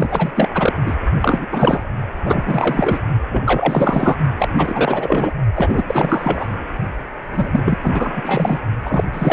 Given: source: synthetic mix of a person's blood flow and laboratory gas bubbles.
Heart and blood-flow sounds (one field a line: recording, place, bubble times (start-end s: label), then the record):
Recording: Doppler ultrasound of blood flow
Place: precordium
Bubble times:
0.00-0.50 s: bubbles
0.54-0.73 s: bubbles
0.86-0.99 s: bubbles
1.21-1.47 s: bubbles
1.51-1.83 s: bubbles
2.23-2.99 s: bubbles
3.29-4.17 s: bubbles
4.38-4.48 s: bubbles
4.57-5.33 s: bubbles
5.54-5.83 s: bubbles
5.87-6.46 s: bubbles
7.31-7.77 s: bubbles
7.83-8.61 s: bubbles
8.85-9.04 s: bubbles
9.12-9.33 s: bubbles
From the record:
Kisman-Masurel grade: 444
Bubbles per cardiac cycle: continuous sound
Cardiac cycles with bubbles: 100%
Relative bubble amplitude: maximal (0.775 to 0.999)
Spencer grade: 4 (maximum detectable bubble signal sounding continuously throughout systole and diastole of every cardiac period, and overriding the amplitude of the normal cardiac signals)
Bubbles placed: only in the low amplitude regions of the cardiac cycle